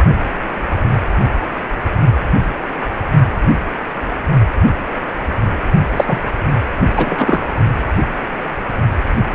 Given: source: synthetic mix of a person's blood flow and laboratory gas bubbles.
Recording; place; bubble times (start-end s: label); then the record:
Doppler ultrasound of blood flow; precordium
5.96-6.21 s: bubbles
6.96-7.45 s: bubbles
From the record:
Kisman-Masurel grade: 213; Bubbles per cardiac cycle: several, 3 to 8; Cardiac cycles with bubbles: 1 to 10%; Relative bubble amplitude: loud (0.450 to 0.775); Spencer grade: 1 (occasional bubble signal discernible with the cardiac motion signal, with majority of cardiac periods free of bubbles); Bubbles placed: only in the low amplitude regions of the cardiac cycle